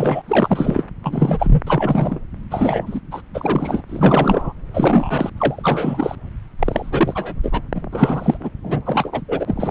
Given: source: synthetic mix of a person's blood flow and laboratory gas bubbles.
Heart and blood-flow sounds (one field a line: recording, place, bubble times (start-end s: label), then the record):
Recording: Doppler ultrasound of blood flow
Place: subclavian vein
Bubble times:
0.00-0.22 s: bubbles
0.27-0.83 s: bubbles
1.02-1.61 s: bubbles
1.67-2.20 s: bubbles
2.51-3.00 s: bubbles
3.11-3.22 s: bubbles
3.34-3.83 s: bubbles
3.89-4.53 s: bubbles
4.73-5.30 s: bubbles
5.37-6.15 s: bubbles
6.59-7.33 s: bubbles
7.42-7.60 s: bubbles
7.74-7.81 s: bubbles
7.92-8.50 s: bubbles
8.63-8.81 s: bubbles
8.86-9.21 s: bubbles
9.28-9.71 s: bubbles
From the record:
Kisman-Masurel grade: 343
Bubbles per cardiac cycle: rolling drumbeat, 9 or more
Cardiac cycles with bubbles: 100%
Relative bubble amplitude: loud (0.450 to 0.775)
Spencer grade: 3 (all of the cardiac periods contain showers or single bubble signals, but not dominating or overriding the cardiac motion signals)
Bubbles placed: anywhere in the cardiac cycle